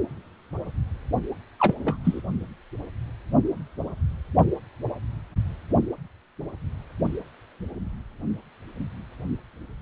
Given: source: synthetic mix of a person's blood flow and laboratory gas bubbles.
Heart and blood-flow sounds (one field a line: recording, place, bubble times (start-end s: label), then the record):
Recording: Doppler ultrasound of blood flow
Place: precordium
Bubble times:
1.59-1.74 s: bubbles
1.83-1.97 s: bubbles
2.04-2.22 s: bubbles
From the record:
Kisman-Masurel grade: 212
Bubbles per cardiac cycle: several, 3 to 8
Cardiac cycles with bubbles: 1 to 10%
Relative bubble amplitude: moderate (0.250 to 0.450)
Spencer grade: 1 (occasional bubble signal discernible with the cardiac motion signal, with majority of cardiac periods free of bubbles)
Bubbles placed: only in the low amplitude regions of the cardiac cycle